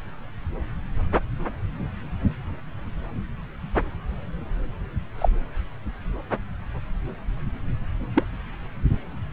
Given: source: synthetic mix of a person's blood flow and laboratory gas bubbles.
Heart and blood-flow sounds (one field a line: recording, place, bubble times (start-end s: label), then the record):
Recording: Doppler ultrasound of blood flow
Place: subclavian vein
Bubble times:
5.18-5.29 s: bubbles
8.14-8.23 s: bubbles
From the record:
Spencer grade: 1 (occasional bubble signal discernible with the cardiac motion signal, with majority of cardiac periods free of bubbles)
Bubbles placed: anywhere in the cardiac cycle